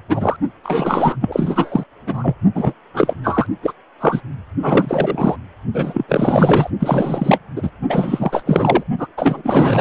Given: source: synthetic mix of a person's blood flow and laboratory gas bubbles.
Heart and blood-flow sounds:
Doppler ultrasound of blood flow; precordium
0.08-0.36 s: bubbles
0.64-1.17 s: bubbles
1.21-1.83 s: bubbles
2.06-2.35 s: bubbles
2.55-2.74 s: bubbles
2.94-3.15 s: bubbles
3.24-3.47 s: bubbles
3.62-3.73 s: bubbles
4.00-4.21 s: bubbles
4.62-5.36 s: bubbles
5.73-6.05 s: bubbles
6.08-6.71 s: bubbles
6.79-7.38 s: bubbles
7.56-7.71 s: bubbles
7.88-8.43 s: bubbles
8.46-8.83 s: bubbles
8.98-9.07 s: bubbles
9.17-9.81 s: bubbles
From the record:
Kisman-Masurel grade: 444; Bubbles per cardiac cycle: continuous sound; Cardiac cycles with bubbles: 100%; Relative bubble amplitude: maximal (0.775 to 0.999); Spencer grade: 4 (maximum detectable bubble signal sounding continuously throughout systole and diastole of every cardiac period, and overriding the amplitude of the normal cardiac signals); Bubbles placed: only in the low amplitude regions of the cardiac cycle

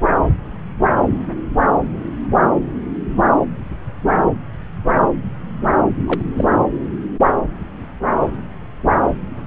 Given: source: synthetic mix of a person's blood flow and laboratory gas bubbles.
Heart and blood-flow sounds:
Doppler ultrasound of blood flow; subclavian vein
6.06-6.22 s: bubbles
6.37-6.45 s: bubbles
From the record:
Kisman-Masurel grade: 112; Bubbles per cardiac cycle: 1 to 2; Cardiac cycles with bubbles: 1 to 10%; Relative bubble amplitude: moderate (0.250 to 0.450); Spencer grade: 1 (occasional bubble signal discernible with the cardiac motion signal, with majority of cardiac periods free of bubbles); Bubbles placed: anywhere in the cardiac cycle

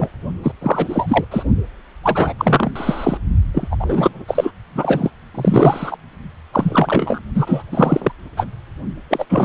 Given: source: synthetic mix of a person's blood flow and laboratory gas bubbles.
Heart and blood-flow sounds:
Doppler ultrasound of blood flow; precordium
0.00-0.08 s: bubbles
0.43-0.52 s: bubbles
0.61-1.25 s: bubbles
1.31-1.45 s: bubbles
2.03-2.33 s: bubbles
2.38-2.71 s: bubbles
2.75-3.17 s: bubbles
3.53-3.67 s: bubbles
3.71-3.75 s: bubbles
3.79-4.25 s: bubbles
4.28-4.51 s: bubbles
4.75-5.10 s: bubbles
5.34-5.96 s: bubbles
6.53-7.20 s: bubbles
7.35-7.64 s: bubbles
7.71-8.12 s: bubbles
8.37-8.46 s: bubbles
9.10-9.25 s: bubbles
9.29-9.45 s: bubbles
From the record:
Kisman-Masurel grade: 333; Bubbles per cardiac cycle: rolling drumbeat, 9 or more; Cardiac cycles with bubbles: 50 to 99%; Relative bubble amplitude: loud (0.450 to 0.775); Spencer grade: 3 (all of the cardiac periods contain showers or single bubble signals, but not dominating or overriding the cardiac motion signals); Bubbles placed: only in the low amplitude regions of the cardiac cycle

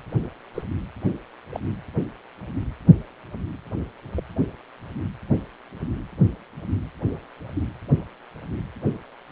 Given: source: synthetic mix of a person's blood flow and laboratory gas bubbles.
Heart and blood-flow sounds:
Doppler ultrasound of blood flow; precordium
0.54-0.62 s: bubbles
1.50-1.60 s: bubbles
4.16-4.22 s: bubbles
From the record:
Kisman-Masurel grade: 121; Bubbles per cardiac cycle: 1 to 2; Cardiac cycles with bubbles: 10 to 50%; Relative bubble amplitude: barely perceptible (0.100 to 0.250); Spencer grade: 2 (many but less than half of the cardiac periods contain bubble signals, singularly or in groups); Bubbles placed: anywhere in the cardiac cycle

